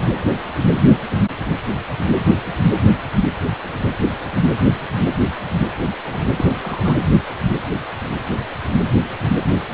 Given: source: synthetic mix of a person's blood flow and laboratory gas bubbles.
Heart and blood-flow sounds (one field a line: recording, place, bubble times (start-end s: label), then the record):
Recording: Doppler ultrasound of blood flow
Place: precordium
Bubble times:
6.05-6.20 s: bubbles
6.36-6.44 s: bubbles
6.61-6.95 s: bubbles
From the record:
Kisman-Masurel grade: 212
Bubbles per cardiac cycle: several, 3 to 8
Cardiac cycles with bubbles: 1 to 10%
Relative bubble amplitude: moderate (0.250 to 0.450)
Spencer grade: 1 (occasional bubble signal discernible with the cardiac motion signal, with majority of cardiac periods free of bubbles)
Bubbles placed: only in the low amplitude regions of the cardiac cycle